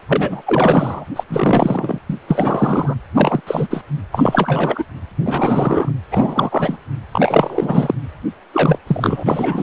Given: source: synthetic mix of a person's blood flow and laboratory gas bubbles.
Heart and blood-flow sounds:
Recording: Doppler ultrasound of blood flow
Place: precordium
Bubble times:
0.09-0.42 s: bubbles
0.46-1.05 s: bubbles
1.16-1.23 s: bubbles
1.28-1.99 s: bubbles
2.09-2.14 s: bubbles
2.28-2.95 s: bubbles
3.15-3.41 s: bubbles
3.47-3.68 s: bubbles
3.70-3.83 s: bubbles
4.12-4.85 s: bubbles
5.25-5.91 s: bubbles
6.11-6.78 s: bubbles
7.12-7.94 s: bubbles
8.53-8.79 s: bubbles
8.86-9.62 s: bubbles
From the record:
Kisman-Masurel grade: 333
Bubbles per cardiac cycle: rolling drumbeat, 9 or more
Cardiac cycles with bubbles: 50 to 99%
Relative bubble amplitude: loud (0.450 to 0.775)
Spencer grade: 3 (all of the cardiac periods contain showers or single bubble signals, but not dominating or overriding the cardiac motion signals)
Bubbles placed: anywhere in the cardiac cycle

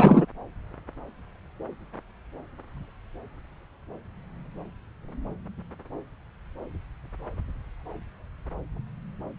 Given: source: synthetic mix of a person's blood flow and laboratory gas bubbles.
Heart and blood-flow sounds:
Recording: Doppler ultrasound of blood flow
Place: subclavian vein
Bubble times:
0.00-0.26 s: bubbles
From the record:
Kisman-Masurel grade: 113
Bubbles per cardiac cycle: 1 to 2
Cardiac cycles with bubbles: 1 to 10%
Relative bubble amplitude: loud (0.450 to 0.775)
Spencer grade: 1 (occasional bubble signal discernible with the cardiac motion signal, with majority of cardiac periods free of bubbles)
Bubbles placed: anywhere in the cardiac cycle

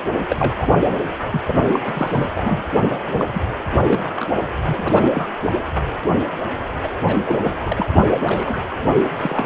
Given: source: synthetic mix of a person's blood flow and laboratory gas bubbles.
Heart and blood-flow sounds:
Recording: Doppler ultrasound of blood flow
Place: precordium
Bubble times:
0.29-0.54 s: bubbles
0.58-0.68 s: bubbles
0.88-0.99 s: bubbles
1.30-1.41 s: bubbles
1.47-1.58 s: bubbles
1.64-2.26 s: bubbles
2.35-2.64 s: bubbles
3.07-3.25 s: bubbles
3.34-3.40 s: bubbles
3.86-4.31 s: bubbles
4.66-5.38 s: bubbles
5.45-5.53 s: bubbles
6.08-6.24 s: bubbles
6.83-6.88 s: bubbles
7.07-7.15 s: bubbles
7.25-7.42 s: bubbles
7.44-7.54 s: bubbles
7.63-7.88 s: bubbles
8.25-8.59 s: bubbles
8.96-9.09 s: bubbles
9.17-9.45 s: bubbles
From the record:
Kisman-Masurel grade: 242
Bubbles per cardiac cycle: several, 3 to 8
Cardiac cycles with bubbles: 100%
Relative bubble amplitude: moderate (0.250 to 0.450)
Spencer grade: 3 (all of the cardiac periods contain showers or single bubble signals, but not dominating or overriding the cardiac motion signals)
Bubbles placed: anywhere in the cardiac cycle

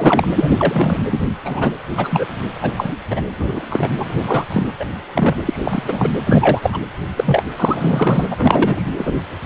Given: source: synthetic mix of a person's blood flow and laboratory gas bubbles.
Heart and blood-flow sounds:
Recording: Doppler ultrasound of blood flow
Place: precordium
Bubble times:
0.00-0.28 s: bubbles
0.34-1.00 s: bubbles
1.10-1.23 s: bubbles
1.44-1.72 s: bubbles
1.97-2.25 s: bubbles
2.61-2.71 s: bubbles
2.76-2.97 s: bubbles
3.10-3.21 s: bubbles
3.38-3.66 s: bubbles
3.69-3.90 s: bubbles
3.96-4.46 s: bubbles
4.50-4.65 s: bubbles
4.79-4.85 s: bubbles
5.14-5.34 s: bubbles
5.45-5.83 s: bubbles
5.88-6.10 s: bubbles
6.25-6.79 s: bubbles
7.16-7.43 s: bubbles
7.57-8.25 s: bubbles
8.30-8.88 s: bubbles
8.97-9.14 s: bubbles
9.43-9.46 s: bubbles
From the record:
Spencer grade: 3 (all of the cardiac periods contain showers or single bubble signals, but not dominating or overriding the cardiac motion signals)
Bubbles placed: anywhere in the cardiac cycle

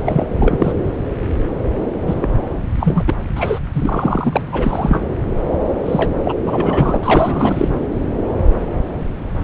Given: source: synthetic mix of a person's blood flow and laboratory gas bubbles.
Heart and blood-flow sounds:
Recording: Doppler ultrasound of blood flow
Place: subclavian vein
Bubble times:
0.04-0.27 s: bubbles
0.36-0.73 s: bubbles
2.08-2.30 s: bubbles
2.80-3.04 s: bubbles
3.07-3.14 s: bubbles
3.35-3.59 s: bubbles
3.73-4.46 s: bubbles
4.52-5.03 s: bubbles
5.85-6.11 s: bubbles
6.24-6.33 s: bubbles
6.46-6.96 s: bubbles
7.02-7.68 s: bubbles
From the record:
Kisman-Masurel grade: 333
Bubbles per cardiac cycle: rolling drumbeat, 9 or more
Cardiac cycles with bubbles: 50 to 99%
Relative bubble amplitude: loud (0.450 to 0.775)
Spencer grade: 3 (all of the cardiac periods contain showers or single bubble signals, but not dominating or overriding the cardiac motion signals)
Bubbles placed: anywhere in the cardiac cycle

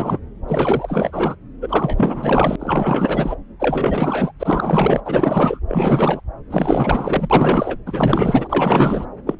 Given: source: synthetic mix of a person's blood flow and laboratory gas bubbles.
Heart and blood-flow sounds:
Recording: Doppler ultrasound of blood flow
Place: subclavian vein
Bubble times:
0.00-0.20 s: bubbles
0.47-1.35 s: bubbles
1.61-2.56 s: bubbles
2.59-3.35 s: bubbles
3.59-4.32 s: bubbles
4.40-5.59 s: bubbles
5.67-6.21 s: bubbles
6.49-7.78 s: bubbles
7.86-9.05 s: bubbles
9.26-9.36 s: bubbles
From the record:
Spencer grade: 4 (maximum detectable bubble signal sounding continuously throughout systole and diastole of every cardiac period, and overriding the amplitude of the normal cardiac signals)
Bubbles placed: anywhere in the cardiac cycle

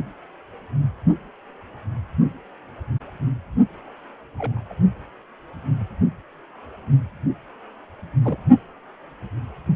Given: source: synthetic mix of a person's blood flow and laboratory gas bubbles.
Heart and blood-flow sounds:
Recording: Doppler ultrasound of blood flow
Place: precordium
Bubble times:
4.38-4.74 s: bubbles
8.22-8.37 s: bubbles
From the record:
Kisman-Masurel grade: 121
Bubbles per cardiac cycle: 1 to 2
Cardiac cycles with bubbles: 10 to 50%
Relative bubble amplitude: barely perceptible (0.100 to 0.250)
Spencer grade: 2 (many but less than half of the cardiac periods contain bubble signals, singularly or in groups)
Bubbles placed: only in the low amplitude regions of the cardiac cycle

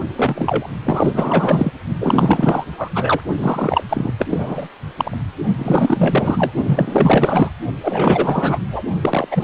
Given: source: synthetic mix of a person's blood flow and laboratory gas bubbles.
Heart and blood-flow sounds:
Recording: Doppler ultrasound of blood flow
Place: precordium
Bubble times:
0.16-0.67 s: bubbles
0.84-1.72 s: bubbles
2.00-2.65 s: bubbles
2.77-2.90 s: bubbles
2.94-3.21 s: bubbles
3.38-3.83 s: bubbles
3.89-4.12 s: bubbles
4.18-4.25 s: bubbles
4.29-4.68 s: bubbles
4.96-5.17 s: bubbles
5.58-6.53 s: bubbles
6.62-7.50 s: bubbles
7.83-8.59 s: bubbles
8.71-8.83 s: bubbles
9.02-9.28 s: bubbles
9.31-9.44 s: bubbles
From the record:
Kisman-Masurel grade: 444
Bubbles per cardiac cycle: continuous sound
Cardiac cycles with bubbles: 100%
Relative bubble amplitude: maximal (0.775 to 0.999)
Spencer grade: 4 (maximum detectable bubble signal sounding continuously throughout systole and diastole of every cardiac period, and overriding the amplitude of the normal cardiac signals)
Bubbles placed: only in the low amplitude regions of the cardiac cycle

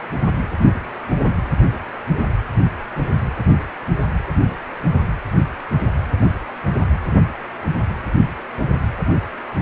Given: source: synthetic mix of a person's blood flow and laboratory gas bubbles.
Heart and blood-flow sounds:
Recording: Doppler ultrasound of blood flow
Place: precordium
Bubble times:
2.94-3.05 s: bubbles
From the record:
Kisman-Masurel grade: 111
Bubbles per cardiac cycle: 1 to 2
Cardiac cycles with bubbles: 1 to 10%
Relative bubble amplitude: barely perceptible (0.100 to 0.250)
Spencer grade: 1 (occasional bubble signal discernible with the cardiac motion signal, with majority of cardiac periods free of bubbles)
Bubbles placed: anywhere in the cardiac cycle

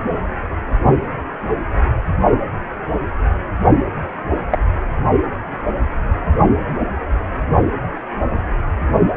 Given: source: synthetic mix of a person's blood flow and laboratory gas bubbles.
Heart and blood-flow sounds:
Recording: Doppler ultrasound of blood flow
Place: precordium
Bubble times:
4.51-4.59 s: bubbles
From the record:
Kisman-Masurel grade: 123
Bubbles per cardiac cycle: 1 to 2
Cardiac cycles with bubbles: 10 to 50%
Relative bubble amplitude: loud (0.450 to 0.775)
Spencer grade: 2 (many but less than half of the cardiac periods contain bubble signals, singularly or in groups)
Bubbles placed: only in the low amplitude regions of the cardiac cycle

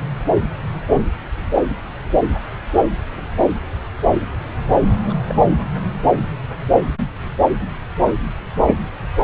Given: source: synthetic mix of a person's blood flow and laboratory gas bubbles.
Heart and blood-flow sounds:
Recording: Doppler ultrasound of blood flow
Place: subclavian vein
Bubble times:
5.09-5.14 s: bubbles
5.28-5.35 s: bubbles
From the record:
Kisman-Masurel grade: 112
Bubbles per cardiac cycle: 1 to 2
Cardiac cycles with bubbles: 1 to 10%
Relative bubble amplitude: moderate (0.250 to 0.450)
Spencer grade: 1 (occasional bubble signal discernible with the cardiac motion signal, with majority of cardiac periods free of bubbles)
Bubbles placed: anywhere in the cardiac cycle

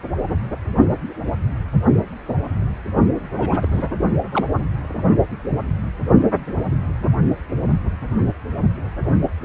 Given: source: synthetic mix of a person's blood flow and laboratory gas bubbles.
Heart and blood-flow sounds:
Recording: Doppler ultrasound of blood flow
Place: precordium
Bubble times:
3.37-3.67 s: bubbles
3.71-3.88 s: bubbles
4.31-4.67 s: bubbles
From the record:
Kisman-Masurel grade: 212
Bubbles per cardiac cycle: several, 3 to 8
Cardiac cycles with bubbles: 1 to 10%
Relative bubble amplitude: moderate (0.250 to 0.450)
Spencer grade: 1 (occasional bubble signal discernible with the cardiac motion signal, with majority of cardiac periods free of bubbles)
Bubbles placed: only in the low amplitude regions of the cardiac cycle

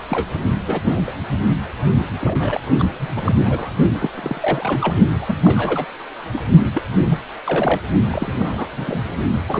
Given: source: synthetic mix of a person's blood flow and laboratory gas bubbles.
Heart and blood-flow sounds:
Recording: Doppler ultrasound of blood flow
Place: precordium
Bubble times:
0.09-0.26 s: bubbles
0.66-1.00 s: bubbles
1.06-1.15 s: bubbles
1.99-2.06 s: bubbles
2.22-2.60 s: bubbles
2.78-2.85 s: bubbles
2.99-3.10 s: bubbles
3.16-3.73 s: bubbles
3.95-4.09 s: bubbles
4.14-4.94 s: bubbles
5.21-5.39 s: bubbles
5.43-5.86 s: bubbles
6.32-6.42 s: bubbles
6.73-6.82 s: bubbles
7.09-7.21 s: bubbles
7.44-7.80 s: bubbles
8.10-8.67 s: bubbles
8.73-9.12 s: bubbles
9.48-9.60 s: bubbles
From the record:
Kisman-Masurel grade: 242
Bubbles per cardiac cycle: several, 3 to 8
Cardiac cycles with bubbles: 100%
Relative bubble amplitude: moderate (0.250 to 0.450)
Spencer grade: 3 (all of the cardiac periods contain showers or single bubble signals, but not dominating or overriding the cardiac motion signals)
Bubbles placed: only in the low amplitude regions of the cardiac cycle

